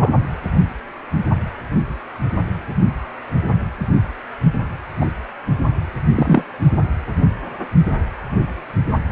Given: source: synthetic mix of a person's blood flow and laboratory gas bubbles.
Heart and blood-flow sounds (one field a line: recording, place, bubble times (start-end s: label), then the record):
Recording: Doppler ultrasound of blood flow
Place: precordium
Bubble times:
0.00-0.11 s: bubbles
5.00-5.05 s: bubbles
6.15-6.46 s: bubbles
From the record:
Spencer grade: 2 (many but less than half of the cardiac periods contain bubble signals, singularly or in groups)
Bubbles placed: only in the low amplitude regions of the cardiac cycle